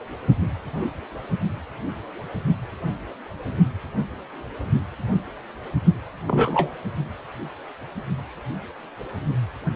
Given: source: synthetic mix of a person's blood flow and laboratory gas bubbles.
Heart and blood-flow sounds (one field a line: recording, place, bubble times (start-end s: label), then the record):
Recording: Doppler ultrasound of blood flow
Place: precordium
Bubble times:
6.27-6.79 s: bubbles
From the record:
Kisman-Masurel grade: 113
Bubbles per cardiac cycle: 1 to 2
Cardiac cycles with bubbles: 1 to 10%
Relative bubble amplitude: loud (0.450 to 0.775)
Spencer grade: 1 (occasional bubble signal discernible with the cardiac motion signal, with majority of cardiac periods free of bubbles)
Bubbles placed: only in the low amplitude regions of the cardiac cycle